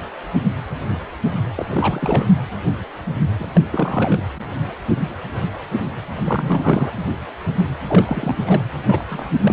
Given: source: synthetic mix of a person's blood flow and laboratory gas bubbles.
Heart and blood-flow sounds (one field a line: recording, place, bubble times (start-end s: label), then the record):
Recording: Doppler ultrasound of blood flow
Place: precordium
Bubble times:
1.56-2.27 s: bubbles
3.39-3.46 s: bubbles
3.54-3.60 s: bubbles
3.71-4.22 s: bubbles
6.15-6.93 s: bubbles
7.87-8.63 s: bubbles
8.85-9.05 s: bubbles
9.09-9.24 s: bubbles
9.39-9.53 s: bubbles
From the record:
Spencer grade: 3 (all of the cardiac periods contain showers or single bubble signals, but not dominating or overriding the cardiac motion signals)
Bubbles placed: anywhere in the cardiac cycle